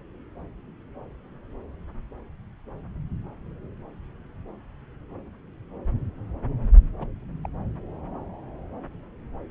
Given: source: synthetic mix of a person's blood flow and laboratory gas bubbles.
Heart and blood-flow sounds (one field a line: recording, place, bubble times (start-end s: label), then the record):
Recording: Doppler ultrasound of blood flow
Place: subclavian vein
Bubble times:
7.00-7.07 s: bubbles
7.44-7.48 s: bubbles
From the record:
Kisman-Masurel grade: 111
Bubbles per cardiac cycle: 1 to 2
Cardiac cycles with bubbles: 1 to 10%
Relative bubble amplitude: barely perceptible (0.100 to 0.250)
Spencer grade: 1 (occasional bubble signal discernible with the cardiac motion signal, with majority of cardiac periods free of bubbles)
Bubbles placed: anywhere in the cardiac cycle